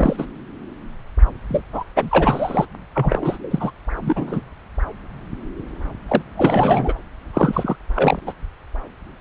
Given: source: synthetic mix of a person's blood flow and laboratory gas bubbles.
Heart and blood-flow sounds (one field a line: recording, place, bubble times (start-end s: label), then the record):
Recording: Doppler ultrasound of blood flow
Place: subclavian vein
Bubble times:
0.00-0.26 s: bubbles
1.49-1.61 s: bubbles
1.73-1.83 s: bubbles
1.96-2.65 s: bubbles
2.94-3.38 s: bubbles
3.50-3.71 s: bubbles
4.01-4.41 s: bubbles
6.08-6.22 s: bubbles
6.37-6.93 s: bubbles
7.33-7.76 s: bubbles
7.96-8.19 s: bubbles
8.26-8.32 s: bubbles
From the record:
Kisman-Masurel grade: 332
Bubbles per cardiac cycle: rolling drumbeat, 9 or more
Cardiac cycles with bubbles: 50 to 99%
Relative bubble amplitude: moderate (0.250 to 0.450)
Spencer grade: 3 (all of the cardiac periods contain showers or single bubble signals, but not dominating or overriding the cardiac motion signals)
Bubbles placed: anywhere in the cardiac cycle